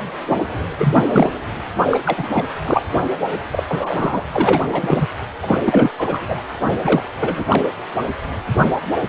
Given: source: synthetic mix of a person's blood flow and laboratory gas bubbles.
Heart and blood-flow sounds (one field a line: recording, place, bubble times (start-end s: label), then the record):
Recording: Doppler ultrasound of blood flow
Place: precordium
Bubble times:
0.00-0.02 s: bubbles
0.31-0.36 s: bubbles
0.78-1.04 s: bubbles
1.12-1.32 s: bubbles
1.89-1.99 s: bubbles
2.05-2.29 s: bubbles
2.33-2.46 s: bubbles
2.62-2.83 s: bubbles
3.51-3.63 s: bubbles
3.68-4.29 s: bubbles
4.31-4.62 s: bubbles
4.72-5.07 s: bubbles
5.42-5.58 s: bubbles
5.64-5.90 s: bubbles
5.98-6.42 s: bubbles
6.58-7.06 s: bubbles
7.20-7.46 s: bubbles
7.48-7.68 s: bubbles
From the record:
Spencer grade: 3 (all of the cardiac periods contain showers or single bubble signals, but not dominating or overriding the cardiac motion signals)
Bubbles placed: anywhere in the cardiac cycle